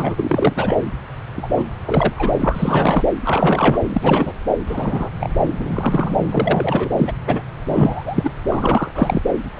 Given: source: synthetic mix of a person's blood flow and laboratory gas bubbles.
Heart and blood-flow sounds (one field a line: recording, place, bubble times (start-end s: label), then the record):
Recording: Doppler ultrasound of blood flow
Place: subclavian vein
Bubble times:
0.00-0.76 s: bubbles
1.36-1.48 s: bubbles
1.56-1.65 s: bubbles
1.85-2.13 s: bubbles
2.16-3.04 s: bubbles
3.24-3.78 s: bubbles
3.90-4.38 s: bubbles
4.66-5.09 s: bubbles
5.19-5.29 s: bubbles
5.58-6.17 s: bubbles
6.31-6.90 s: bubbles
6.97-7.12 s: bubbles
7.27-7.42 s: bubbles
7.68-8.30 s: bubbles
8.47-9.21 s: bubbles
9.52-9.60 s: bubbles
From the record:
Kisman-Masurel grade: 243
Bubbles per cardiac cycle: several, 3 to 8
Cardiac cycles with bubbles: 100%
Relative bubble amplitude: loud (0.450 to 0.775)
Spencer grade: 3 (all of the cardiac periods contain showers or single bubble signals, but not dominating or overriding the cardiac motion signals)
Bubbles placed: anywhere in the cardiac cycle